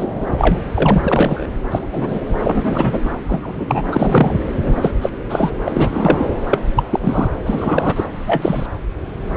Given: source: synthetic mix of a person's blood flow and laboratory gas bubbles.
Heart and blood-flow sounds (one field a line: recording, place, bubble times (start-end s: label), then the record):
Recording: Doppler ultrasound of blood flow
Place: subclavian vein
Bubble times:
0.00-0.64 s: bubbles
0.75-1.48 s: bubbles
1.71-2.19 s: bubbles
2.44-3.10 s: bubbles
3.29-3.82 s: bubbles
3.87-4.37 s: bubbles
4.64-4.91 s: bubbles
5.02-5.10 s: bubbles
5.29-5.52 s: bubbles
5.64-6.27 s: bubbles
6.51-6.60 s: bubbles
6.76-6.84 s: bubbles
6.89-7.29 s: bubbles
7.45-8.04 s: bubbles
8.27-8.66 s: bubbles
From the record:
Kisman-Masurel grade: 233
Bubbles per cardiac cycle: several, 3 to 8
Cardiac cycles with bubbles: 50 to 99%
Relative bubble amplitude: loud (0.450 to 0.775)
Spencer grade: 3 (all of the cardiac periods contain showers or single bubble signals, but not dominating or overriding the cardiac motion signals)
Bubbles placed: anywhere in the cardiac cycle